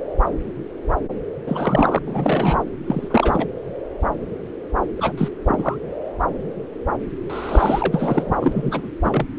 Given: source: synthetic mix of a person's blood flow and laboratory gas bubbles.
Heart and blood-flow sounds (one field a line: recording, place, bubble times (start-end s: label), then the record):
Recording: Doppler ultrasound of blood flow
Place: subclavian vein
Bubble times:
1.46-1.99 s: bubbles
2.06-2.63 s: bubbles
2.87-3.47 s: bubbles
4.97-5.12 s: bubbles
5.17-5.29 s: bubbles
5.48-5.76 s: bubbles
7.29-8.36 s: bubbles
8.39-8.91 s: bubbles
8.96-9.27 s: bubbles
From the record:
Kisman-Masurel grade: 222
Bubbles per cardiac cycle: several, 3 to 8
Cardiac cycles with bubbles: 10 to 50%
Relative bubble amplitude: moderate (0.250 to 0.450)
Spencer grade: 2 (many but less than half of the cardiac periods contain bubble signals, singularly or in groups)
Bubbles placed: anywhere in the cardiac cycle